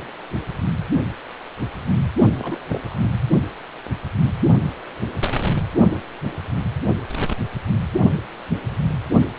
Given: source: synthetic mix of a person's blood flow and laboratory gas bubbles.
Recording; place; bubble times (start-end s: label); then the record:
Doppler ultrasound of blood flow; precordium
2.37-2.81 s: bubbles
2.90-2.97 s: bubbles
3.02-3.10 s: bubbles
From the record:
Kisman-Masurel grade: 221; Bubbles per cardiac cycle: several, 3 to 8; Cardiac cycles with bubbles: 10 to 50%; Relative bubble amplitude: barely perceptible (0.100 to 0.250); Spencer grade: 2 (many but less than half of the cardiac periods contain bubble signals, singularly or in groups); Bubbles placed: only in the low amplitude regions of the cardiac cycle